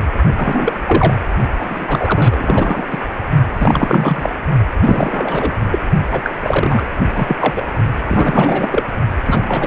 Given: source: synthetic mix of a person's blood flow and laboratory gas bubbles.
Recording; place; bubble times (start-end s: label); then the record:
Doppler ultrasound of blood flow; precordium
0.36-0.80 s: bubbles
0.87-1.15 s: bubbles
1.59-2.86 s: bubbles
2.90-2.99 s: bubbles
3.54-4.29 s: bubbles
4.82-5.53 s: bubbles
5.71-5.79 s: bubbles
6.11-6.32 s: bubbles
6.42-6.87 s: bubbles
7.14-7.37 s: bubbles
7.40-7.63 s: bubbles
8.09-8.87 s: bubbles
9.25-9.67 s: bubbles
From the record:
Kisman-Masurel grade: 343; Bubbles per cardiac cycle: rolling drumbeat, 9 or more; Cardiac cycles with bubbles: 100%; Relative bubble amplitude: loud (0.450 to 0.775); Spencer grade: 3 (all of the cardiac periods contain showers or single bubble signals, but not dominating or overriding the cardiac motion signals); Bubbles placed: only in the low amplitude regions of the cardiac cycle